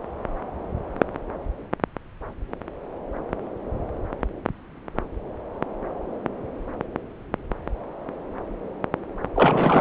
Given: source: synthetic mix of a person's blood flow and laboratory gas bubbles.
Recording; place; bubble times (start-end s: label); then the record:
Doppler ultrasound of blood flow; subclavian vein
9.36-9.81 s: bubbles
From the record:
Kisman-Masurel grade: 212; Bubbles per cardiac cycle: several, 3 to 8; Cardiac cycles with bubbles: 1 to 10%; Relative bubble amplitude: moderate (0.250 to 0.450); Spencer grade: 1 (occasional bubble signal discernible with the cardiac motion signal, with majority of cardiac periods free of bubbles); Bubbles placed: anywhere in the cardiac cycle